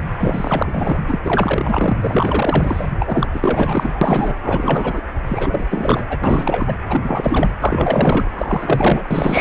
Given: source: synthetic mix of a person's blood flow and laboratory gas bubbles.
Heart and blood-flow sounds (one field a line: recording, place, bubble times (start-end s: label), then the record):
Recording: Doppler ultrasound of blood flow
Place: precordium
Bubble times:
0.19-0.99 s: bubbles
1.08-1.19 s: bubbles
1.24-1.97 s: bubbles
2.01-2.90 s: bubbles
2.99-3.27 s: bubbles
3.33-4.37 s: bubbles
4.43-5.02 s: bubbles
5.26-5.67 s: bubbles
5.71-6.18 s: bubbles
6.23-6.76 s: bubbles
6.88-7.01 s: bubbles
7.04-7.52 s: bubbles
7.60-8.29 s: bubbles
8.32-9.41 s: bubbles
From the record:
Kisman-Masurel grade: 444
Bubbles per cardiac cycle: continuous sound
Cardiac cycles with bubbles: 100%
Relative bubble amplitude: maximal (0.775 to 0.999)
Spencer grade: 4 (maximum detectable bubble signal sounding continuously throughout systole and diastole of every cardiac period, and overriding the amplitude of the normal cardiac signals)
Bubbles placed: anywhere in the cardiac cycle